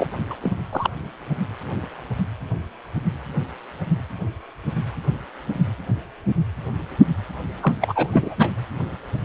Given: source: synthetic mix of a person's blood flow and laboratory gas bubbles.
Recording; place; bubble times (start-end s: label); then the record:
Doppler ultrasound of blood flow; precordium
0.00-0.07 s: bubbles
0.30-0.35 s: bubbles
0.43-0.52 s: bubbles
0.72-0.90 s: bubbles
7.60-7.73 s: bubbles
7.81-8.08 s: bubbles
8.12-8.35 s: bubbles
8.39-8.51 s: bubbles
From the record:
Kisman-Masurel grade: 222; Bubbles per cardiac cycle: several, 3 to 8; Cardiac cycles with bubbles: 10 to 50%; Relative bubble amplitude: moderate (0.250 to 0.450); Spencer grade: 2 (many but less than half of the cardiac periods contain bubble signals, singularly or in groups); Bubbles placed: anywhere in the cardiac cycle